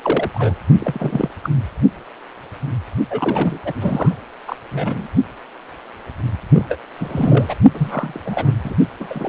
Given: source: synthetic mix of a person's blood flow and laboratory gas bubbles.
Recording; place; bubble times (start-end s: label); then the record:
Doppler ultrasound of blood flow; precordium
0.02-0.31 s: bubbles
0.34-0.55 s: bubbles
0.78-1.28 s: bubbles
1.43-1.49 s: bubbles
3.10-3.58 s: bubbles
3.65-3.73 s: bubbles
3.76-4.15 s: bubbles
4.47-4.56 s: bubbles
4.71-5.08 s: bubbles
6.52-6.66 s: bubbles
6.69-6.79 s: bubbles
6.97-7.54 s: bubbles
7.72-8.19 s: bubbles
8.25-8.52 s: bubbles
8.63-8.74 s: bubbles
8.99-9.29 s: bubbles
From the record:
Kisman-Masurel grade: 332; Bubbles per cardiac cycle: rolling drumbeat, 9 or more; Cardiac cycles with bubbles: 50 to 99%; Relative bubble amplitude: moderate (0.250 to 0.450); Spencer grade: 3 (all of the cardiac periods contain showers or single bubble signals, but not dominating or overriding the cardiac motion signals); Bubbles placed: only in the low amplitude regions of the cardiac cycle